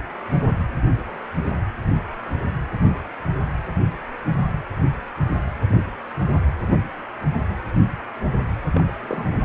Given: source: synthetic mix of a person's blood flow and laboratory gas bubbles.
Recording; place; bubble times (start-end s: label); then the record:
Doppler ultrasound of blood flow; precordium
8.74-8.91 s: bubbles
8.99-9.42 s: bubbles
From the record:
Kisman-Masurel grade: 211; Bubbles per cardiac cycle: several, 3 to 8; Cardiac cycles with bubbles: 1 to 10%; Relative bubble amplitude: barely perceptible (0.100 to 0.250); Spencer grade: 1 (occasional bubble signal discernible with the cardiac motion signal, with majority of cardiac periods free of bubbles); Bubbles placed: anywhere in the cardiac cycle